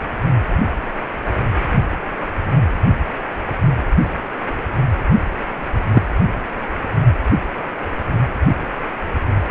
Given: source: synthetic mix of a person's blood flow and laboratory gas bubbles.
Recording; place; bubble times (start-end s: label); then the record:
Doppler ultrasound of blood flow; precordium
5.93-6.03 s: bubbles
From the record:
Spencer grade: 1 (occasional bubble signal discernible with the cardiac motion signal, with majority of cardiac periods free of bubbles); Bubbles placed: anywhere in the cardiac cycle